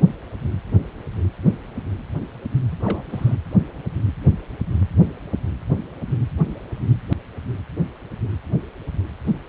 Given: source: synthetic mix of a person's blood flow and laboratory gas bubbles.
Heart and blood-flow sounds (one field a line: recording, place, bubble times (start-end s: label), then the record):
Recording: Doppler ultrasound of blood flow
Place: precordium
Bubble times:
2.72-2.77 s: bubbles
2.80-3.03 s: bubbles
3.10-3.35 s: bubbles
From the record:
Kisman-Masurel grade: 211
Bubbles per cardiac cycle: several, 3 to 8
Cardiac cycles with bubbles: 1 to 10%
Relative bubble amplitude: barely perceptible (0.100 to 0.250)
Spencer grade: 1 (occasional bubble signal discernible with the cardiac motion signal, with majority of cardiac periods free of bubbles)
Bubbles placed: anywhere in the cardiac cycle